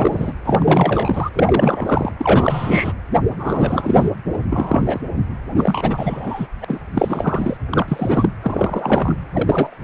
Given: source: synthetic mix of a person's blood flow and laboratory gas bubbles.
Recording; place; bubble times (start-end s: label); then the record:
Doppler ultrasound of blood flow; precordium
0.00-0.32 s: bubbles
0.44-1.29 s: bubbles
1.34-2.11 s: bubbles
2.18-2.93 s: bubbles
3.31-4.10 s: bubbles
4.33-4.38 s: bubbles
4.50-5.01 s: bubbles
5.58-6.47 s: bubbles
6.62-6.65 s: bubbles
6.68-6.82 s: bubbles
6.94-7.57 s: bubbles
7.70-8.29 s: bubbles
8.43-9.15 s: bubbles
9.31-9.77 s: bubbles
From the record:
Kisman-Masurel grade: 343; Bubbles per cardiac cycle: rolling drumbeat, 9 or more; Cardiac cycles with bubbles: 100%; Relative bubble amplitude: loud (0.450 to 0.775); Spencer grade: 3 (all of the cardiac periods contain showers or single bubble signals, but not dominating or overriding the cardiac motion signals); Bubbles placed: anywhere in the cardiac cycle